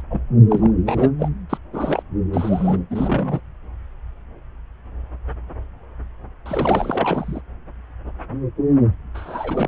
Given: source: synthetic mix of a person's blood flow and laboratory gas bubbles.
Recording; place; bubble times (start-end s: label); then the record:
Doppler ultrasound of blood flow; subclavian vein
0.00-0.02 s: bubbles
0.10-0.21 s: bubbles
0.50-0.71 s: bubbles
0.85-1.10 s: bubbles
1.19-1.28 s: bubbles
1.49-1.58 s: bubbles
1.73-2.02 s: bubbles
2.32-2.79 s: bubbles
2.90-3.40 s: bubbles
6.46-7.41 s: bubbles
9.14-9.68 s: bubbles
From the record:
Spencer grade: 3 (all of the cardiac periods contain showers or single bubble signals, but not dominating or overriding the cardiac motion signals); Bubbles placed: anywhere in the cardiac cycle